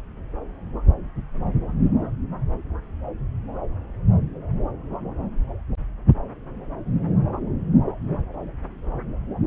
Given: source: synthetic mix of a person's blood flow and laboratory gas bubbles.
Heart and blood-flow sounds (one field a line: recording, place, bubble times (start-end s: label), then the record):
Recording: Doppler ultrasound of blood flow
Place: subclavian vein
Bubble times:
no bubbles
From the record:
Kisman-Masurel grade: 000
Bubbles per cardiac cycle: 0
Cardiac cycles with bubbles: 0%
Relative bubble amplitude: no bubbles discernible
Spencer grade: 0 (complete lack of bubble signals)